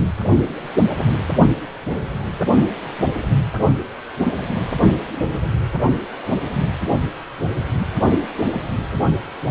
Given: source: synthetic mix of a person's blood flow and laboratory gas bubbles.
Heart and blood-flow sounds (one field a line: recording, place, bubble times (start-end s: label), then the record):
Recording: Doppler ultrasound of blood flow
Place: precordium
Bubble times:
no bubbles
From the record:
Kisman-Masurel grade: 000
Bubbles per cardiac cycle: 0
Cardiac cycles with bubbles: 0%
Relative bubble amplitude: no bubbles discernible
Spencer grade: 0 (complete lack of bubble signals)